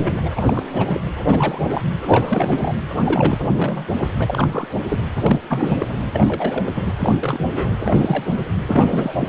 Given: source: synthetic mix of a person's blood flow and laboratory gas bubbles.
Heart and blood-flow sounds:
Doppler ultrasound of blood flow; precordium
0.00-0.21 s: bubbles
0.25-0.30 s: bubbles
0.35-0.42 s: bubbles
0.45-0.63 s: bubbles
0.73-1.01 s: bubbles
1.26-1.82 s: bubbles
2.06-2.75 s: bubbles
3.05-3.39 s: bubbles
3.56-3.87 s: bubbles
3.97-4.10 s: bubbles
4.18-4.48 s: bubbles
4.52-4.67 s: bubbles
4.88-5.04 s: bubbles
5.21-5.41 s: bubbles
5.48-5.86 s: bubbles
6.01-6.10 s: bubbles
6.13-6.72 s: bubbles
6.75-6.92 s: bubbles
6.98-7.73 s: bubbles
7.80-8.24 s: bubbles
8.32-8.45 s: bubbles
8.67-9.13 s: bubbles
9.17-9.28 s: bubbles
From the record:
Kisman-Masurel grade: 342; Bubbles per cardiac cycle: rolling drumbeat, 9 or more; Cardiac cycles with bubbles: 100%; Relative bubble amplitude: moderate (0.250 to 0.450); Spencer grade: 3 (all of the cardiac periods contain showers or single bubble signals, but not dominating or overriding the cardiac motion signals); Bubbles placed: anywhere in the cardiac cycle

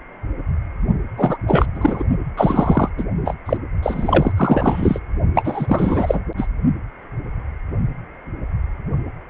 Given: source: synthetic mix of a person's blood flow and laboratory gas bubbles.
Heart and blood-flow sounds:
Doppler ultrasound of blood flow; precordium
1.17-1.38 s: bubbles
1.46-1.66 s: bubbles
1.75-2.03 s: bubbles
2.36-2.90 s: bubbles
2.97-3.04 s: bubbles
3.25-3.33 s: bubbles
3.46-3.57 s: bubbles
3.83-4.32 s: bubbles
4.37-5.00 s: bubbles
5.35-6.20 s: bubbles
6.37-6.46 s: bubbles
From the record:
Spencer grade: 3 (all of the cardiac periods contain showers or single bubble signals, but not dominating or overriding the cardiac motion signals); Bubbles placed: only in the low amplitude regions of the cardiac cycle

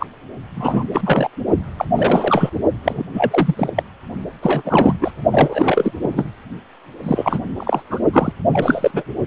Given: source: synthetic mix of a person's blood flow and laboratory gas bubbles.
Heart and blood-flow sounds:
Doppler ultrasound of blood flow; precordium
0.00-0.06 s: bubbles
0.55-0.84 s: bubbles
0.93-1.29 s: bubbles
1.78-1.85 s: bubbles
1.96-2.50 s: bubbles
2.84-3.04 s: bubbles
3.13-3.71 s: bubbles
3.75-3.83 s: bubbles
4.42-4.94 s: bubbles
5.00-5.12 s: bubbles
5.32-5.92 s: bubbles
6.02-6.25 s: bubbles
7.03-7.40 s: bubbles
7.57-7.82 s: bubbles
7.90-8.00 s: bubbles
8.12-8.32 s: bubbles
8.52-8.91 s: bubbles
8.93-9.04 s: bubbles
From the record:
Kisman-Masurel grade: 343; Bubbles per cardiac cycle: rolling drumbeat, 9 or more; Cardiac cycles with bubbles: 100%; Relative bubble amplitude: loud (0.450 to 0.775); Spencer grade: 3 (all of the cardiac periods contain showers or single bubble signals, but not dominating or overriding the cardiac motion signals); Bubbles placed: only in the low amplitude regions of the cardiac cycle

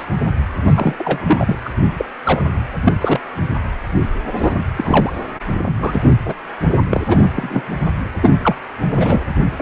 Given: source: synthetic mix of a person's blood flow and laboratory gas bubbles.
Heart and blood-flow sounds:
Doppler ultrasound of blood flow; precordium
0.00-0.05 s: bubbles
0.68-0.94 s: bubbles
0.98-1.19 s: bubbles
1.26-1.58 s: bubbles
1.65-1.70 s: bubbles
1.97-2.06 s: bubbles
2.25-2.43 s: bubbles
2.85-2.93 s: bubbles
3.01-3.20 s: bubbles
4.35-4.54 s: bubbles
4.58-4.63 s: bubbles
4.77-5.12 s: bubbles
5.67-5.73 s: bubbles
5.81-6.00 s: bubbles
6.25-6.34 s: bubbles
6.90-7.01 s: bubbles
7.10-7.17 s: bubbles
7.22-7.28 s: bubbles
7.35-7.62 s: bubbles
8.21-8.31 s: bubbles
8.42-8.55 s: bubbles
8.97-9.23 s: bubbles
9.56-9.62 s: bubbles
From the record:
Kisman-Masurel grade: 243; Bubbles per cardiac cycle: several, 3 to 8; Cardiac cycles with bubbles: 100%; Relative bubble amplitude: loud (0.450 to 0.775); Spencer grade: 3 (all of the cardiac periods contain showers or single bubble signals, but not dominating or overriding the cardiac motion signals); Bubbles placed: anywhere in the cardiac cycle

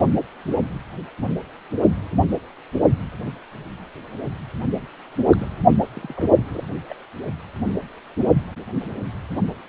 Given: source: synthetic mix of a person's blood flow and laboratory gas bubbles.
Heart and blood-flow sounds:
Doppler ultrasound of blood flow; precordium
5.19-5.27 s: bubbles
5.32-5.49 s: bubbles
5.68-5.76 s: bubbles
5.95-6.13 s: bubbles
6.16-6.32 s: bubbles
6.37-6.63 s: bubbles
6.89-6.94 s: bubbles
From the record:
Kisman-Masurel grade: 221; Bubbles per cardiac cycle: several, 3 to 8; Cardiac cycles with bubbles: 10 to 50%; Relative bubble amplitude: barely perceptible (0.100 to 0.250); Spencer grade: 2 (many but less than half of the cardiac periods contain bubble signals, singularly or in groups); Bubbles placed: only in the low amplitude regions of the cardiac cycle

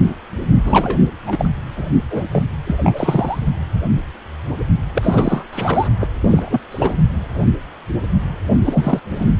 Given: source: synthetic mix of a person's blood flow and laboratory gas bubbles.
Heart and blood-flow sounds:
Doppler ultrasound of blood flow; precordium
0.66-0.99 s: bubbles
1.26-1.49 s: bubbles
1.76-1.86 s: bubbles
2.10-2.23 s: bubbles
2.31-2.44 s: bubbles
2.66-2.76 s: bubbles
2.83-3.39 s: bubbles
4.94-5.43 s: bubbles
5.52-5.88 s: bubbles
6.00-6.07 s: bubbles
6.22-6.60 s: bubbles
6.71-6.93 s: bubbles
8.66-9.00 s: bubbles
9.11-9.26 s: bubbles
From the record:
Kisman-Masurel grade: 333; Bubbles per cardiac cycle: rolling drumbeat, 9 or more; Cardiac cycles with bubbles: 50 to 99%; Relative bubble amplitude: loud (0.450 to 0.775); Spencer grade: 3 (all of the cardiac periods contain showers or single bubble signals, but not dominating or overriding the cardiac motion signals); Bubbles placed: only in the low amplitude regions of the cardiac cycle

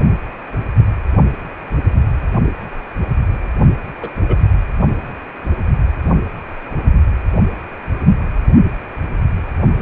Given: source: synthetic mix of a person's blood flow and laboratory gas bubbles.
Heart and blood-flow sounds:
Doppler ultrasound of blood flow; precordium
2.44-2.53 s: bubbles
4.00-4.10 s: bubbles
4.26-4.38 s: bubbles
5.45-5.52 s: bubbles
9.78-9.82 s: bubbles
From the record:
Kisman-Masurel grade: 121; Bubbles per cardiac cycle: 1 to 2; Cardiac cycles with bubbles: 10 to 50%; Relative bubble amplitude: barely perceptible (0.100 to 0.250); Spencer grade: 2 (many but less than half of the cardiac periods contain bubble signals, singularly or in groups); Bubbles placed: anywhere in the cardiac cycle

